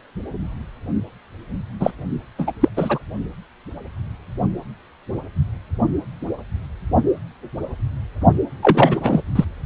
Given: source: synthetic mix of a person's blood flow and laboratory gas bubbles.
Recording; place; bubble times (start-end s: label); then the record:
Doppler ultrasound of blood flow; precordium
1.79-1.92 s: bubbles
2.38-2.52 s: bubbles
2.60-2.69 s: bubbles
2.76-2.98 s: bubbles
8.62-9.23 s: bubbles
9.35-9.45 s: bubbles
From the record:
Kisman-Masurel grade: 223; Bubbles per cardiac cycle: several, 3 to 8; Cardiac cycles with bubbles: 10 to 50%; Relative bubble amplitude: loud (0.450 to 0.775); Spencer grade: 2 (many but less than half of the cardiac periods contain bubble signals, singularly or in groups); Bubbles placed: only in the low amplitude regions of the cardiac cycle